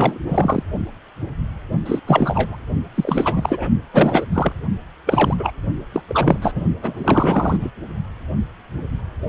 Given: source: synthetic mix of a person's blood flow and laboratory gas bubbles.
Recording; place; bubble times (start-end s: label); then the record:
Doppler ultrasound of blood flow; precordium
0.00-0.18 s: bubbles
0.26-0.63 s: bubbles
1.85-1.99 s: bubbles
2.07-2.58 s: bubbles
2.95-3.69 s: bubbles
3.93-4.25 s: bubbles
4.32-4.52 s: bubbles
5.06-5.35 s: bubbles
5.38-5.50 s: bubbles
5.92-6.01 s: bubbles
6.08-6.39 s: bubbles
6.42-6.52 s: bubbles
6.54-6.64 s: bubbles
6.81-7.58 s: bubbles
7.60-7.71 s: bubbles
From the record:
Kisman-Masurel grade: 333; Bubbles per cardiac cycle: rolling drumbeat, 9 or more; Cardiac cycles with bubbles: 50 to 99%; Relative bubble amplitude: loud (0.450 to 0.775); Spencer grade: 3 (all of the cardiac periods contain showers or single bubble signals, but not dominating or overriding the cardiac motion signals); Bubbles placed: only in the low amplitude regions of the cardiac cycle